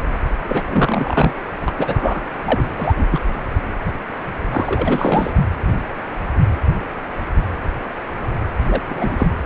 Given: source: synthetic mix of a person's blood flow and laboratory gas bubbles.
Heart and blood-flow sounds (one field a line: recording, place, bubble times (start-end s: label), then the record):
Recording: Doppler ultrasound of blood flow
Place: precordium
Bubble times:
0.48-0.63 s: bubbles
0.67-1.35 s: bubbles
1.68-1.72 s: bubbles
1.78-2.23 s: bubbles
2.44-2.67 s: bubbles
2.77-3.06 s: bubbles
3.11-3.20 s: bubbles
4.51-5.33 s: bubbles
8.66-8.81 s: bubbles
8.90-9.29 s: bubbles
From the record:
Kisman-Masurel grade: 223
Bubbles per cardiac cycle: several, 3 to 8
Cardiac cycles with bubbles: 10 to 50%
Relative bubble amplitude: loud (0.450 to 0.775)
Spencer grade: 2 (many but less than half of the cardiac periods contain bubble signals, singularly or in groups)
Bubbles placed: anywhere in the cardiac cycle